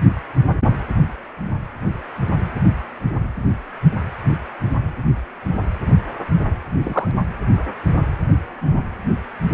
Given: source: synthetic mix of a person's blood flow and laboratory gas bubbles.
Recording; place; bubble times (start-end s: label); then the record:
Doppler ultrasound of blood flow; precordium
6.82-7.12 s: bubbles
From the record:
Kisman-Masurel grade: 112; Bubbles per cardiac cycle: 1 to 2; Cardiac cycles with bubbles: 1 to 10%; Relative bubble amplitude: moderate (0.250 to 0.450); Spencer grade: 1 (occasional bubble signal discernible with the cardiac motion signal, with majority of cardiac periods free of bubbles); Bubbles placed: anywhere in the cardiac cycle